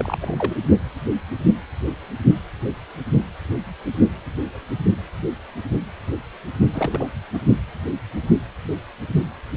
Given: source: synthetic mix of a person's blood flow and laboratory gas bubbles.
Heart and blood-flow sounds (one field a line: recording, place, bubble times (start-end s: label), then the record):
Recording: Doppler ultrasound of blood flow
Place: precordium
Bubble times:
0.00-0.55 s: bubbles
6.73-7.08 s: bubbles
7.33-7.38 s: bubbles
From the record:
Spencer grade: 2 (many but less than half of the cardiac periods contain bubble signals, singularly or in groups)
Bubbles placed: only in the low amplitude regions of the cardiac cycle